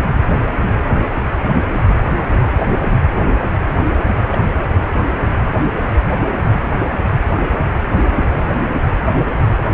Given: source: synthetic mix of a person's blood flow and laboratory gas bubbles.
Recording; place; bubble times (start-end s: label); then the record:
Doppler ultrasound of blood flow; precordium
0.40-0.47 s: bubbles
0.77-0.81 s: bubbles
4.04-4.12 s: bubbles
4.25-4.38 s: bubbles
7.39-7.49 s: bubbles
From the record:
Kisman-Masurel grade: 121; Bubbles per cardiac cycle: 1 to 2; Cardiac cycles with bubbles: 10 to 50%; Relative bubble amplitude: barely perceptible (0.100 to 0.250); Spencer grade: 2 (many but less than half of the cardiac periods contain bubble signals, singularly or in groups); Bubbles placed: anywhere in the cardiac cycle